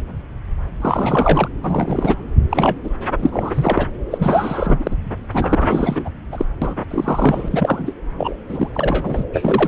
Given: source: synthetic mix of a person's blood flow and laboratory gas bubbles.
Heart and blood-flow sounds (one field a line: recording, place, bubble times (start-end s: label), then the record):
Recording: Doppler ultrasound of blood flow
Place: subclavian vein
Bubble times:
0.80-1.49 s: bubbles
1.62-2.16 s: bubbles
2.49-2.77 s: bubbles
2.83-2.90 s: bubbles
3.19-3.86 s: bubbles
4.10-4.96 s: bubbles
5.31-6.09 s: bubbles
6.31-6.45 s: bubbles
6.61-6.74 s: bubbles
6.90-7.93 s: bubbles
8.18-8.37 s: bubbles
8.49-9.24 s: bubbles
9.34-9.68 s: bubbles
From the record:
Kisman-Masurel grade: 333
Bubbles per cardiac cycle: rolling drumbeat, 9 or more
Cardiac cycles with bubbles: 50 to 99%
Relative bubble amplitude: loud (0.450 to 0.775)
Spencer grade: 3 (all of the cardiac periods contain showers or single bubble signals, but not dominating or overriding the cardiac motion signals)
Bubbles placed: anywhere in the cardiac cycle